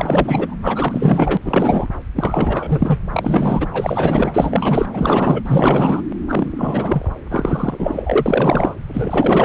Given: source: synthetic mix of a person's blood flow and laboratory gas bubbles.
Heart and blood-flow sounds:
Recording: Doppler ultrasound of blood flow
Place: subclavian vein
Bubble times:
0.00-0.56 s: bubbles
0.61-1.38 s: bubbles
1.41-1.88 s: bubbles
2.16-2.98 s: bubbles
3.05-3.67 s: bubbles
3.73-4.87 s: bubbles
4.93-6.02 s: bubbles
6.28-7.09 s: bubbles
7.29-8.75 s: bubbles
8.88-9.45 s: bubbles
From the record:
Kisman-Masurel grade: 444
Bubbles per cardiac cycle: continuous sound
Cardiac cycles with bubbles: 100%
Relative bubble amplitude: maximal (0.775 to 0.999)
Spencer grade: 4 (maximum detectable bubble signal sounding continuously throughout systole and diastole of every cardiac period, and overriding the amplitude of the normal cardiac signals)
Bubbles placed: anywhere in the cardiac cycle

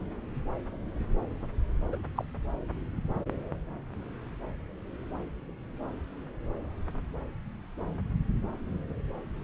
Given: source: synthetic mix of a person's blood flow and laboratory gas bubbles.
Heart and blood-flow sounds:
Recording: Doppler ultrasound of blood flow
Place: subclavian vein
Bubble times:
1.92-1.96 s: bubbles
2.15-2.25 s: bubbles
From the record:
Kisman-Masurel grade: 111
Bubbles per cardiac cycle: 1 to 2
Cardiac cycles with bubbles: 1 to 10%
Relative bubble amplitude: barely perceptible (0.100 to 0.250)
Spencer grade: 1 (occasional bubble signal discernible with the cardiac motion signal, with majority of cardiac periods free of bubbles)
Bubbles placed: anywhere in the cardiac cycle

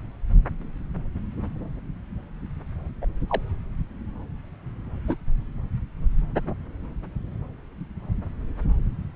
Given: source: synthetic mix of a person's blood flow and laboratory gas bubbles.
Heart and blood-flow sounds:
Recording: Doppler ultrasound of blood flow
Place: subclavian vein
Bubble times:
3.01-3.06 s: bubbles
3.28-3.41 s: bubbles
5.04-5.15 s: bubbles
From the record:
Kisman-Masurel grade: 121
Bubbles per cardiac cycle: 1 to 2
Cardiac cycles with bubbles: 10 to 50%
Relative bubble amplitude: barely perceptible (0.100 to 0.250)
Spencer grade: 2 (many but less than half of the cardiac periods contain bubble signals, singularly or in groups)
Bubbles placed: anywhere in the cardiac cycle

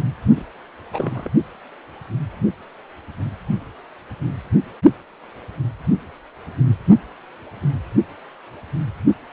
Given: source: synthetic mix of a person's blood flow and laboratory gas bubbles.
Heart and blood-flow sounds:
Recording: Doppler ultrasound of blood flow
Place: precordium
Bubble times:
0.36-0.46 s: bubbles
0.93-1.30 s: bubbles
From the record:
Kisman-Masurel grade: 211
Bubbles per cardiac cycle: several, 3 to 8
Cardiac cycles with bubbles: 1 to 10%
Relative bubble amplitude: barely perceptible (0.100 to 0.250)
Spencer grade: 1 (occasional bubble signal discernible with the cardiac motion signal, with majority of cardiac periods free of bubbles)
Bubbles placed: only in the low amplitude regions of the cardiac cycle

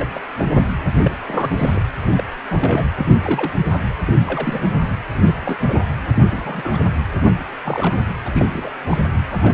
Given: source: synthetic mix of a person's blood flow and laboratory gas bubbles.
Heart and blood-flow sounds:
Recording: Doppler ultrasound of blood flow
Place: precordium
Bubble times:
0.00-0.09 s: bubbles
0.14-0.21 s: bubbles
0.39-0.45 s: bubbles
0.54-0.63 s: bubbles
1.04-1.11 s: bubbles
1.26-1.82 s: bubbles
2.09-2.24 s: bubbles
2.50-2.85 s: bubbles
2.98-3.06 s: bubbles
3.21-3.52 s: bubbles
3.72-3.81 s: bubbles
4.05-4.13 s: bubbles
4.27-4.68 s: bubbles
5.15-5.33 s: bubbles
5.40-5.57 s: bubbles
5.61-5.80 s: bubbles
6.16-6.23 s: bubbles
6.31-6.79 s: bubbles
7.65-8.05 s: bubbles
8.25-8.30 s: bubbles
8.34-8.46 s: bubbles
8.53-8.70 s: bubbles
8.88-9.02 s: bubbles
9.30-9.54 s: bubbles
From the record:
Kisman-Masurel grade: 242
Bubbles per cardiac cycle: several, 3 to 8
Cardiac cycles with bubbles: 100%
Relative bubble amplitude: moderate (0.250 to 0.450)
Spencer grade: 3 (all of the cardiac periods contain showers or single bubble signals, but not dominating or overriding the cardiac motion signals)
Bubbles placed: anywhere in the cardiac cycle

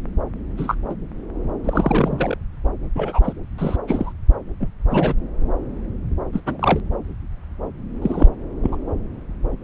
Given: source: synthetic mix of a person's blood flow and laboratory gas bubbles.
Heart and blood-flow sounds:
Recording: Doppler ultrasound of blood flow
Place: subclavian vein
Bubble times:
0.57-0.75 s: bubbles
0.89-0.93 s: bubbles
1.64-2.38 s: bubbles
2.96-3.33 s: bubbles
3.58-3.76 s: bubbles
3.88-4.12 s: bubbles
4.60-4.68 s: bubbles
4.90-5.14 s: bubbles
6.32-6.40 s: bubbles
6.46-6.80 s: bubbles
8.02-8.28 s: bubbles
8.63-8.77 s: bubbles
From the record:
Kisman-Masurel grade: 232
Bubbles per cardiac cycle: several, 3 to 8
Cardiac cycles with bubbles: 50 to 99%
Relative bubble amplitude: moderate (0.250 to 0.450)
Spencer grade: 3 (all of the cardiac periods contain showers or single bubble signals, but not dominating or overriding the cardiac motion signals)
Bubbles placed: anywhere in the cardiac cycle

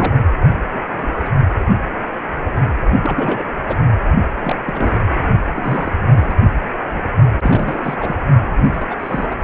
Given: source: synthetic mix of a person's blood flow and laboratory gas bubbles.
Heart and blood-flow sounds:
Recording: Doppler ultrasound of blood flow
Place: precordium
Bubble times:
0.00-0.14 s: bubbles
0.70-1.12 s: bubbles
1.16-1.29 s: bubbles
3.01-3.49 s: bubbles
3.66-3.80 s: bubbles
4.43-4.56 s: bubbles
4.65-5.05 s: bubbles
5.52-5.92 s: bubbles
6.08-6.37 s: bubbles
6.95-7.04 s: bubbles
7.42-7.96 s: bubbles
7.99-8.15 s: bubbles
8.64-8.84 s: bubbles
8.90-8.96 s: bubbles
8.99-9.36 s: bubbles
From the record:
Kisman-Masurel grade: 232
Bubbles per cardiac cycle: several, 3 to 8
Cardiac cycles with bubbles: 50 to 99%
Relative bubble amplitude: moderate (0.250 to 0.450)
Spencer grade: 3 (all of the cardiac periods contain showers or single bubble signals, but not dominating or overriding the cardiac motion signals)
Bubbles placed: only in the low amplitude regions of the cardiac cycle

